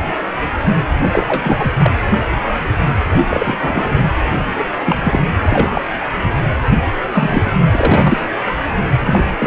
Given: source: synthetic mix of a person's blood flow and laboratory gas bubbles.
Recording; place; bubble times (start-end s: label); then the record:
Doppler ultrasound of blood flow; precordium
1.12-1.73 s: bubbles
1.77-1.92 s: bubbles
3.30-4.05 s: bubbles
4.58-4.64 s: bubbles
4.85-4.96 s: bubbles
5.03-5.20 s: bubbles
5.42-5.70 s: bubbles
5.74-5.81 s: bubbles
7.12-7.51 s: bubbles
7.72-8.25 s: bubbles
9.04-9.20 s: bubbles
9.38-9.47 s: bubbles
From the record:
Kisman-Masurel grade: 233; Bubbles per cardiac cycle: several, 3 to 8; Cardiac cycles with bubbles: 50 to 99%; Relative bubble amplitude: loud (0.450 to 0.775); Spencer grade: 3 (all of the cardiac periods contain showers or single bubble signals, but not dominating or overriding the cardiac motion signals); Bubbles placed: anywhere in the cardiac cycle